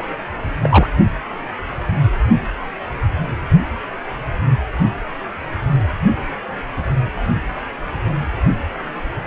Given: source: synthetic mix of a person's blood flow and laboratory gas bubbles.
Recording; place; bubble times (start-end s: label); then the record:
Doppler ultrasound of blood flow; precordium
0.00-0.03 s: bubbles
0.61-0.90 s: bubbles
From the record:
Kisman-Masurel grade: 213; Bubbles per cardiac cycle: several, 3 to 8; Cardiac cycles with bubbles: 1 to 10%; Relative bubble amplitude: loud (0.450 to 0.775); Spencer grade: 1 (occasional bubble signal discernible with the cardiac motion signal, with majority of cardiac periods free of bubbles); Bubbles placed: anywhere in the cardiac cycle